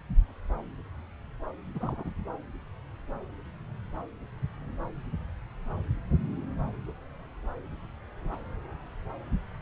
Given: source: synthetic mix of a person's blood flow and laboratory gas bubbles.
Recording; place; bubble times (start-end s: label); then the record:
Doppler ultrasound of blood flow; subclavian vein
1.75-2.10 s: bubbles
From the record:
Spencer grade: 1 (occasional bubble signal discernible with the cardiac motion signal, with majority of cardiac periods free of bubbles); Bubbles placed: anywhere in the cardiac cycle